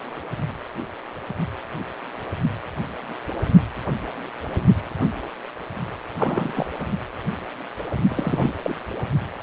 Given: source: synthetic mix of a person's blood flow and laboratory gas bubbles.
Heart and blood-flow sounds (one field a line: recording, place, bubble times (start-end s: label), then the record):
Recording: Doppler ultrasound of blood flow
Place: precordium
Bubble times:
6.17-6.66 s: bubbles
8.09-8.52 s: bubbles
8.62-8.74 s: bubbles
From the record:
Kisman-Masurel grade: 222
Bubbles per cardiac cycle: several, 3 to 8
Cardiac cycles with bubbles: 10 to 50%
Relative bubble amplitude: moderate (0.250 to 0.450)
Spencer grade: 2 (many but less than half of the cardiac periods contain bubble signals, singularly or in groups)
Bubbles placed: only in the low amplitude regions of the cardiac cycle